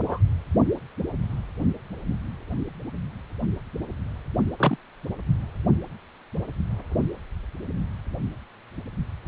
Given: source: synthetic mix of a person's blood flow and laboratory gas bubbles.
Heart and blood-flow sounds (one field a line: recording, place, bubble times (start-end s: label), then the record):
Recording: Doppler ultrasound of blood flow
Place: precordium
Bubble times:
0.00-0.20 s: bubbles
4.58-4.76 s: bubbles
From the record:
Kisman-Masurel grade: 122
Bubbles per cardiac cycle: 1 to 2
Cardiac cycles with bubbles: 10 to 50%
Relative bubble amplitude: moderate (0.250 to 0.450)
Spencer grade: 2 (many but less than half of the cardiac periods contain bubble signals, singularly or in groups)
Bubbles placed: only in the low amplitude regions of the cardiac cycle